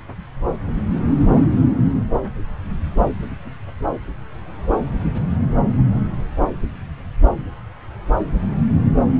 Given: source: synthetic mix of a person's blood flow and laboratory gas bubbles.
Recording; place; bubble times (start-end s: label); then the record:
Doppler ultrasound of blood flow; subclavian vein
no bubbles
From the record:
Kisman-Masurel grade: 000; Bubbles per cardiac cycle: 0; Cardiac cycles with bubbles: 0%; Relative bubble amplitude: no bubbles discernible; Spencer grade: 0 (complete lack of bubble signals)